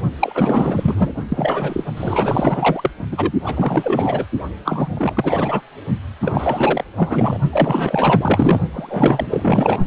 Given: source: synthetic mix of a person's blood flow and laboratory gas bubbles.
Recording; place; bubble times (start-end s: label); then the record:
Doppler ultrasound of blood flow; precordium
0.20-1.14 s: bubbles
1.16-1.23 s: bubbles
1.28-1.83 s: bubbles
1.97-2.91 s: bubbles
3.11-3.32 s: bubbles
3.44-4.26 s: bubbles
4.65-4.92 s: bubbles
4.95-5.62 s: bubbles
6.22-6.85 s: bubbles
6.97-7.38 s: bubbles
7.52-8.60 s: bubbles
8.72-9.79 s: bubbles
From the record:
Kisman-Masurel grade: 444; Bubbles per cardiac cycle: continuous sound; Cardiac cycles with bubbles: 100%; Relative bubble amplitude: maximal (0.775 to 0.999); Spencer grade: 4 (maximum detectable bubble signal sounding continuously throughout systole and diastole of every cardiac period, and overriding the amplitude of the normal cardiac signals); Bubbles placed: only in the low amplitude regions of the cardiac cycle